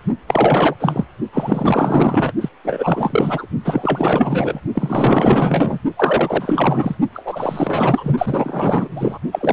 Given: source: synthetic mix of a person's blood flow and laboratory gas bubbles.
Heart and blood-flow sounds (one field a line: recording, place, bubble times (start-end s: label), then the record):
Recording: Doppler ultrasound of blood flow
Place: precordium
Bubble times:
0.28-0.75 s: bubbles
0.80-1.05 s: bubbles
1.33-2.32 s: bubbles
2.41-2.49 s: bubbles
2.64-3.46 s: bubbles
3.65-4.60 s: bubbles
4.75-5.79 s: bubbles
5.97-6.95 s: bubbles
7.13-8.88 s: bubbles
8.95-9.18 s: bubbles
9.31-9.53 s: bubbles
From the record:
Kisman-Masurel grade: 444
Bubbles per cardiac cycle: continuous sound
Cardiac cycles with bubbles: 100%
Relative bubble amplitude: maximal (0.775 to 0.999)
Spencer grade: 4 (maximum detectable bubble signal sounding continuously throughout systole and diastole of every cardiac period, and overriding the amplitude of the normal cardiac signals)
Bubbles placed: only in the low amplitude regions of the cardiac cycle